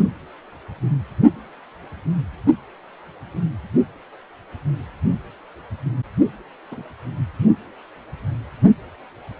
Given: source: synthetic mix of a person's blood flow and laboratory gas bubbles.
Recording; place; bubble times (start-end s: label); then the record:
Doppler ultrasound of blood flow; precordium
6.71-6.82 s: bubbles
From the record:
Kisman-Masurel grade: 111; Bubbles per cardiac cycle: 1 to 2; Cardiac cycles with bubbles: 1 to 10%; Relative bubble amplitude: barely perceptible (0.100 to 0.250); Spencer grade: 1 (occasional bubble signal discernible with the cardiac motion signal, with majority of cardiac periods free of bubbles); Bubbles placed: only in the low amplitude regions of the cardiac cycle